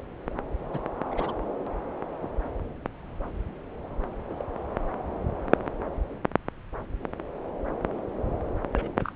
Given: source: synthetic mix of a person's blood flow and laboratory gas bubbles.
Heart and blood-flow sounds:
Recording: Doppler ultrasound of blood flow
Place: subclavian vein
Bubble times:
0.00-0.03 s: bubbles
0.30-0.33 s: bubbles
0.73-0.79 s: bubbles
1.11-1.33 s: bubbles
2.22-2.27 s: bubbles
4.30-4.44 s: bubbles
8.73-9.12 s: bubbles
From the record:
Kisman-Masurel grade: 121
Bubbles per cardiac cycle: 1 to 2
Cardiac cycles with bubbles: 10 to 50%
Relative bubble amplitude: barely perceptible (0.100 to 0.250)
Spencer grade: 2 (many but less than half of the cardiac periods contain bubble signals, singularly or in groups)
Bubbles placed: anywhere in the cardiac cycle

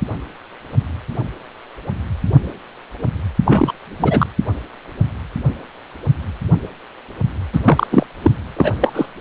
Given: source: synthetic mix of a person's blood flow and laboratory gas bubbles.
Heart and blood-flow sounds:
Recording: Doppler ultrasound of blood flow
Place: precordium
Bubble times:
3.46-3.72 s: bubbles
3.98-4.27 s: bubbles
7.52-7.60 s: bubbles
7.64-7.87 s: bubbles
7.91-8.06 s: bubbles
8.22-8.30 s: bubbles
8.56-8.72 s: bubbles
8.80-9.06 s: bubbles
From the record:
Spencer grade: 2 (many but less than half of the cardiac periods contain bubble signals, singularly or in groups)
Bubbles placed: anywhere in the cardiac cycle

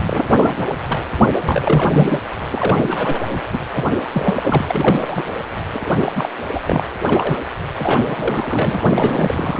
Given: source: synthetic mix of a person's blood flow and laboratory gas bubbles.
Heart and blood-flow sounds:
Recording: Doppler ultrasound of blood flow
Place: precordium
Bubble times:
0.05-0.65 s: bubbles
0.89-1.04 s: bubbles
1.37-2.20 s: bubbles
2.50-3.23 s: bubbles
3.31-3.40 s: bubbles
3.52-3.58 s: bubbles
3.73-3.86 s: bubbles
4.13-4.66 s: bubbles
4.70-5.23 s: bubbles
5.72-6.12 s: bubbles
6.15-6.29 s: bubbles
6.54-6.59 s: bubbles
6.67-6.83 s: bubbles
7.04-7.47 s: bubbles
7.78-7.99 s: bubbles
8.07-9.60 s: bubbles
From the record:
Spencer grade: 3 (all of the cardiac periods contain showers or single bubble signals, but not dominating or overriding the cardiac motion signals)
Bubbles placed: anywhere in the cardiac cycle

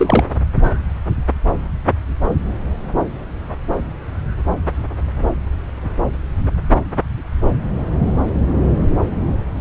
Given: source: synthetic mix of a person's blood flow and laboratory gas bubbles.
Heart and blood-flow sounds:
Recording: Doppler ultrasound of blood flow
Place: subclavian vein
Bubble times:
0.00-0.24 s: bubbles
From the record:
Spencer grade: 1 (occasional bubble signal discernible with the cardiac motion signal, with majority of cardiac periods free of bubbles)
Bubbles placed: anywhere in the cardiac cycle

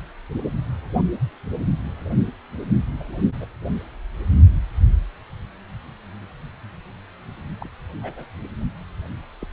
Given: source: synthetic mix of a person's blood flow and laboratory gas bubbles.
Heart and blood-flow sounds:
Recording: Doppler ultrasound of blood flow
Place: precordium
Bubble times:
3.00-3.15 s: bubbles
3.40-3.46 s: bubbles
7.60-7.70 s: bubbles
8.02-8.29 s: bubbles
9.41-9.46 s: bubbles
From the record:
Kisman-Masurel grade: 121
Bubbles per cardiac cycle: 1 to 2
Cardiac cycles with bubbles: 10 to 50%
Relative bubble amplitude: barely perceptible (0.100 to 0.250)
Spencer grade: 2 (many but less than half of the cardiac periods contain bubble signals, singularly or in groups)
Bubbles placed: only in the low amplitude regions of the cardiac cycle

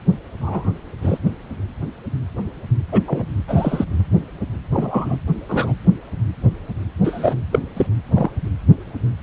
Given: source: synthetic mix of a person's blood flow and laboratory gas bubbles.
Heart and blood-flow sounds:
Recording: Doppler ultrasound of blood flow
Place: precordium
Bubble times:
0.41-0.72 s: bubbles
1.02-1.18 s: bubbles
2.92-3.02 s: bubbles
3.07-3.25 s: bubbles
3.47-3.85 s: bubbles
4.72-5.17 s: bubbles
5.48-5.72 s: bubbles
7.04-7.34 s: bubbles
7.51-7.59 s: bubbles
7.76-7.86 s: bubbles
8.15-8.30 s: bubbles
From the record:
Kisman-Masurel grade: 123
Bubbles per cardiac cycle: 1 to 2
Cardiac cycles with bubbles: 10 to 50%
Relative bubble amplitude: loud (0.450 to 0.775)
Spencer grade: 2 (many but less than half of the cardiac periods contain bubble signals, singularly or in groups)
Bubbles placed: anywhere in the cardiac cycle

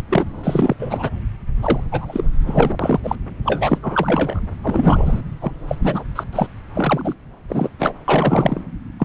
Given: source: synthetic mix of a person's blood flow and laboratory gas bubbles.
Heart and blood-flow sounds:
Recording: Doppler ultrasound of blood flow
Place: subclavian vein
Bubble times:
0.00-0.02 s: bubbles
0.10-0.25 s: bubbles
0.43-0.75 s: bubbles
0.78-1.09 s: bubbles
1.57-1.85 s: bubbles
1.92-2.24 s: bubbles
2.46-2.73 s: bubbles
2.79-3.00 s: bubbles
3.03-3.15 s: bubbles
3.43-3.78 s: bubbles
3.82-4.41 s: bubbles
4.62-5.21 s: bubbles
5.41-5.51 s: bubbles
5.68-5.76 s: bubbles
5.81-6.04 s: bubbles
6.15-6.24 s: bubbles
6.32-6.46 s: bubbles
6.74-7.14 s: bubbles
7.48-7.70 s: bubbles
7.79-7.93 s: bubbles
8.08-8.61 s: bubbles
8.99-9.05 s: bubbles
From the record:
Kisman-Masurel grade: 343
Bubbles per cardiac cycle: rolling drumbeat, 9 or more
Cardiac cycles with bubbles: 100%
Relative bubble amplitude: loud (0.450 to 0.775)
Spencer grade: 3 (all of the cardiac periods contain showers or single bubble signals, but not dominating or overriding the cardiac motion signals)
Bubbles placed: anywhere in the cardiac cycle

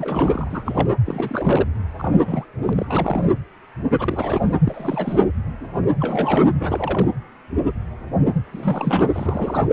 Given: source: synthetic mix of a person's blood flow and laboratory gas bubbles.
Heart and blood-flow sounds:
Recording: Doppler ultrasound of blood flow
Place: precordium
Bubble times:
0.00-0.89 s: bubbles
1.04-1.67 s: bubbles
1.98-2.45 s: bubbles
2.64-2.73 s: bubbles
2.76-3.28 s: bubbles
3.99-4.52 s: bubbles
4.65-5.22 s: bubbles
6.00-6.50 s: bubbles
6.59-7.08 s: bubbles
8.46-9.03 s: bubbles
9.13-9.67 s: bubbles
From the record:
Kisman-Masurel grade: 332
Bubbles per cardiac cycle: rolling drumbeat, 9 or more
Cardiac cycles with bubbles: 50 to 99%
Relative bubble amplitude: moderate (0.250 to 0.450)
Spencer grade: 3 (all of the cardiac periods contain showers or single bubble signals, but not dominating or overriding the cardiac motion signals)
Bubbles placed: anywhere in the cardiac cycle

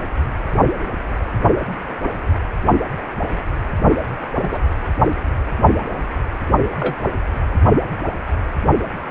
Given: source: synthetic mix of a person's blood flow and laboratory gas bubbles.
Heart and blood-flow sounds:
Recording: Doppler ultrasound of blood flow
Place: precordium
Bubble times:
4.38-4.58 s: bubbles
6.79-6.96 s: bubbles
From the record:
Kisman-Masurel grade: 122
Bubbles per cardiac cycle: 1 to 2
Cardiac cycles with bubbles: 10 to 50%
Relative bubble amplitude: moderate (0.250 to 0.450)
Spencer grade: 2 (many but less than half of the cardiac periods contain bubble signals, singularly or in groups)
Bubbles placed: only in the low amplitude regions of the cardiac cycle

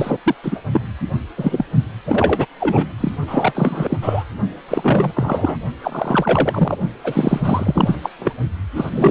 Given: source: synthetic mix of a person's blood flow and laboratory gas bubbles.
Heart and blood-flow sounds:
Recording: Doppler ultrasound of blood flow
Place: precordium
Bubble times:
0.00-0.17 s: bubbles
0.24-0.34 s: bubbles
0.43-0.62 s: bubbles
0.72-0.81 s: bubbles
1.38-1.65 s: bubbles
2.06-2.46 s: bubbles
2.59-2.88 s: bubbles
3.00-3.14 s: bubbles
3.26-3.98 s: bubbles
4.01-4.24 s: bubbles
4.68-5.12 s: bubbles
5.14-5.58 s: bubbles
5.82-6.77 s: bubbles
7.04-7.96 s: bubbles
8.03-8.10 s: bubbles
8.19-8.33 s: bubbles
8.75-9.11 s: bubbles
From the record:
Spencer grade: 3 (all of the cardiac periods contain showers or single bubble signals, but not dominating or overriding the cardiac motion signals)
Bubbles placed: only in the low amplitude regions of the cardiac cycle

